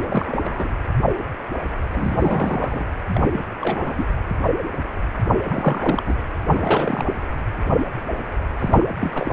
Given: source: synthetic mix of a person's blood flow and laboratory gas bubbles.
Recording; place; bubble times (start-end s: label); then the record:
Doppler ultrasound of blood flow; precordium
0.02-0.83 s: bubbles
1.92-2.85 s: bubbles
3.08-3.29 s: bubbles
3.33-3.41 s: bubbles
3.61-4.06 s: bubbles
5.48-6.03 s: bubbles
6.05-6.16 s: bubbles
6.46-7.15 s: bubbles
8.59-8.85 s: bubbles
9.01-9.33 s: bubbles
From the record:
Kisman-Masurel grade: 332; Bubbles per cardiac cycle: rolling drumbeat, 9 or more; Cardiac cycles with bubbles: 50 to 99%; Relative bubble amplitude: moderate (0.250 to 0.450); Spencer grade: 3 (all of the cardiac periods contain showers or single bubble signals, but not dominating or overriding the cardiac motion signals); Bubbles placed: anywhere in the cardiac cycle